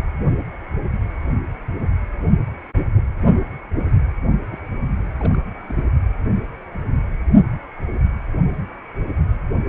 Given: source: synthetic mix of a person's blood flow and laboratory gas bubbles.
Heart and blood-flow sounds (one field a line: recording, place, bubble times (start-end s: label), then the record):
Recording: Doppler ultrasound of blood flow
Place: precordium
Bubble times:
4.51-4.58 s: bubbles
4.96-5.03 s: bubbles
5.20-5.37 s: bubbles
5.69-5.84 s: bubbles
From the record:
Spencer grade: 2 (many but less than half of the cardiac periods contain bubble signals, singularly or in groups)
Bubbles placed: only in the low amplitude regions of the cardiac cycle